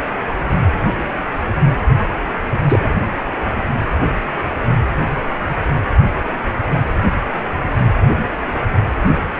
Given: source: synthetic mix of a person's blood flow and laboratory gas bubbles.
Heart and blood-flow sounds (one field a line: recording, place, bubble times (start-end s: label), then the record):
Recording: Doppler ultrasound of blood flow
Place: precordium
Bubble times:
2.00-2.06 s: bubbles
2.68-2.79 s: bubbles
From the record:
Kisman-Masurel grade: 113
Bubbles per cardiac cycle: 1 to 2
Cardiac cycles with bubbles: 1 to 10%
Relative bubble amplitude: loud (0.450 to 0.775)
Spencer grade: 1 (occasional bubble signal discernible with the cardiac motion signal, with majority of cardiac periods free of bubbles)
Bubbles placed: anywhere in the cardiac cycle